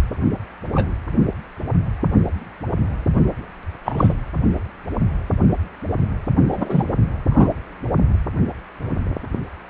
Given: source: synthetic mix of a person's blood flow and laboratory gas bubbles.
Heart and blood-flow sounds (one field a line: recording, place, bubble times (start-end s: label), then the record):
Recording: Doppler ultrasound of blood flow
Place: precordium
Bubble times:
0.74-0.91 s: bubbles
3.85-4.14 s: bubbles
6.50-6.83 s: bubbles
7.31-7.48 s: bubbles
From the record:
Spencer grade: 2 (many but less than half of the cardiac periods contain bubble signals, singularly or in groups)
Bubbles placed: anywhere in the cardiac cycle